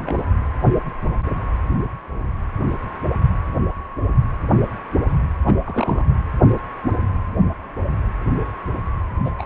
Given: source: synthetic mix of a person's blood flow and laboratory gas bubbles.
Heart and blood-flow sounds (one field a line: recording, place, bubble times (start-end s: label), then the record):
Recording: Doppler ultrasound of blood flow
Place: precordium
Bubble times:
0.00-0.24 s: bubbles
5.47-5.54 s: bubbles
5.64-6.05 s: bubbles
9.25-9.31 s: bubbles
9.38-9.46 s: bubbles
From the record:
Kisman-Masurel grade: 222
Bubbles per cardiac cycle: several, 3 to 8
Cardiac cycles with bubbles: 10 to 50%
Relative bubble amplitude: moderate (0.250 to 0.450)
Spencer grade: 2 (many but less than half of the cardiac periods contain bubble signals, singularly or in groups)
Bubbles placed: anywhere in the cardiac cycle